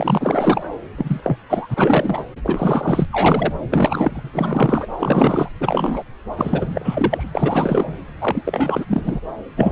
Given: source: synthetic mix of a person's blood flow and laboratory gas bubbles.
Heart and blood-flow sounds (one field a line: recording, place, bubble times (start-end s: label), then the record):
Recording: Doppler ultrasound of blood flow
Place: subclavian vein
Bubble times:
0.00-0.70 s: bubbles
0.98-1.38 s: bubbles
1.50-2.25 s: bubbles
2.44-3.05 s: bubbles
3.12-3.54 s: bubbles
3.70-4.30 s: bubbles
4.33-4.86 s: bubbles
4.99-5.48 s: bubbles
5.60-6.03 s: bubbles
6.37-7.30 s: bubbles
7.34-7.99 s: bubbles
8.21-8.42 s: bubbles
8.46-8.85 s: bubbles
8.88-9.20 s: bubbles
9.56-9.72 s: bubbles
From the record:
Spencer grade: 3 (all of the cardiac periods contain showers or single bubble signals, but not dominating or overriding the cardiac motion signals)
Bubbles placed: anywhere in the cardiac cycle